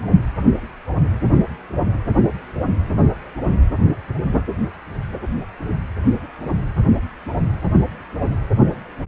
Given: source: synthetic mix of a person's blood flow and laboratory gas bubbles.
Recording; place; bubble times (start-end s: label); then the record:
Doppler ultrasound of blood flow; precordium
no bubbles
From the record:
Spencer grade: 0 (complete lack of bubble signals)